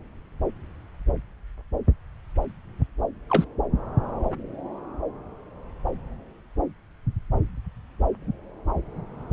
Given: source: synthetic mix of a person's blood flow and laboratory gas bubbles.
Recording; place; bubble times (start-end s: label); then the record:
Doppler ultrasound of blood flow; subclavian vein
3.29-3.44 s: bubbles
From the record:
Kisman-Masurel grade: 113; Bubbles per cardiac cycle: 1 to 2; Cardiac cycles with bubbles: 1 to 10%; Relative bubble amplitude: loud (0.450 to 0.775); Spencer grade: 1 (occasional bubble signal discernible with the cardiac motion signal, with majority of cardiac periods free of bubbles); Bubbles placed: anywhere in the cardiac cycle